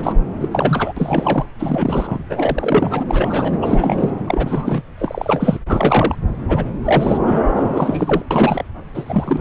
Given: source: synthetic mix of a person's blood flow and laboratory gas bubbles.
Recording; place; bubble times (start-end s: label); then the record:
Doppler ultrasound of blood flow; subclavian vein
0.00-0.15 s: bubbles
0.41-0.48 s: bubbles
0.51-0.93 s: bubbles
0.96-1.45 s: bubbles
1.59-2.19 s: bubbles
2.29-3.04 s: bubbles
3.10-3.59 s: bubbles
3.62-4.10 s: bubbles
4.27-4.82 s: bubbles
4.97-5.59 s: bubbles
5.68-6.15 s: bubbles
6.48-6.67 s: bubbles
6.84-7.18 s: bubbles
7.25-7.39 s: bubbles
7.56-8.22 s: bubbles
8.30-8.63 s: bubbles
8.94-9.41 s: bubbles
From the record:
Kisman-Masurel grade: 343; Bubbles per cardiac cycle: rolling drumbeat, 9 or more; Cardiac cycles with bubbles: 100%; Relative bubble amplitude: loud (0.450 to 0.775); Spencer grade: 3 (all of the cardiac periods contain showers or single bubble signals, but not dominating or overriding the cardiac motion signals); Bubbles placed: anywhere in the cardiac cycle